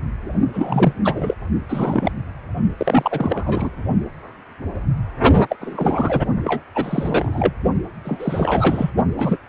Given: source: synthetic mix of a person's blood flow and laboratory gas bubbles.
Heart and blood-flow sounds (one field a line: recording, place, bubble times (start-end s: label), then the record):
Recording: Doppler ultrasound of blood flow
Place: precordium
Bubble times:
0.53-0.93 s: bubbles
1.04-1.34 s: bubbles
1.69-2.12 s: bubbles
2.77-3.70 s: bubbles
5.49-5.55 s: bubbles
5.61-6.22 s: bubbles
6.45-6.61 s: bubbles
6.75-7.54 s: bubbles
8.04-8.91 s: bubbles
9.17-9.37 s: bubbles
From the record:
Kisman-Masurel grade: 333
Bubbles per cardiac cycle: rolling drumbeat, 9 or more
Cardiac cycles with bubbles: 50 to 99%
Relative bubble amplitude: loud (0.450 to 0.775)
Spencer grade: 3 (all of the cardiac periods contain showers or single bubble signals, but not dominating or overriding the cardiac motion signals)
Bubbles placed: only in the low amplitude regions of the cardiac cycle